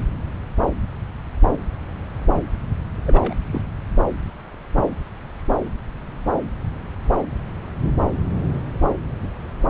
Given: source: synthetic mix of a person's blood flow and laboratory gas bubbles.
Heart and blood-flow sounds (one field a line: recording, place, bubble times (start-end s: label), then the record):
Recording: Doppler ultrasound of blood flow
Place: subclavian vein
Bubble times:
3.06-3.34 s: bubbles
3.52-3.61 s: bubbles
From the record:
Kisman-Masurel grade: 211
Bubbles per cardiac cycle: several, 3 to 8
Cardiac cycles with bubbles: 1 to 10%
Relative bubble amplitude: barely perceptible (0.100 to 0.250)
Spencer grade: 1 (occasional bubble signal discernible with the cardiac motion signal, with majority of cardiac periods free of bubbles)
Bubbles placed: anywhere in the cardiac cycle